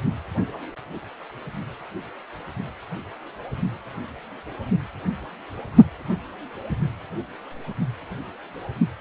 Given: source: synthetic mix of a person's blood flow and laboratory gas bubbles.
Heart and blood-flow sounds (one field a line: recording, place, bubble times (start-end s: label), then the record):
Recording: Doppler ultrasound of blood flow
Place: precordium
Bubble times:
no bubbles
From the record:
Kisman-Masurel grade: 000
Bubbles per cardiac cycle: 0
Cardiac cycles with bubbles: 0%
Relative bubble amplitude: no bubbles discernible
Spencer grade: 0 (complete lack of bubble signals)